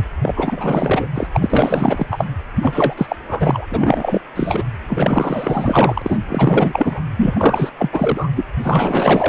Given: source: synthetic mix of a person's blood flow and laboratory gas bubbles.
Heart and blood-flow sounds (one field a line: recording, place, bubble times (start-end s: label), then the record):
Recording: Doppler ultrasound of blood flow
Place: precordium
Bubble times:
0.00-0.02 s: bubbles
0.22-1.09 s: bubbles
1.14-1.27 s: bubbles
1.32-2.25 s: bubbles
2.60-2.94 s: bubbles
2.97-3.16 s: bubbles
3.28-3.66 s: bubbles
3.69-4.21 s: bubbles
4.35-4.65 s: bubbles
4.88-6.18 s: bubbles
6.29-7.04 s: bubbles
7.17-7.70 s: bubbles
7.78-7.90 s: bubbles
7.92-8.29 s: bubbles
8.36-8.45 s: bubbles
8.62-9.29 s: bubbles
From the record:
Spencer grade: 4 (maximum detectable bubble signal sounding continuously throughout systole and diastole of every cardiac period, and overriding the amplitude of the normal cardiac signals)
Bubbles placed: anywhere in the cardiac cycle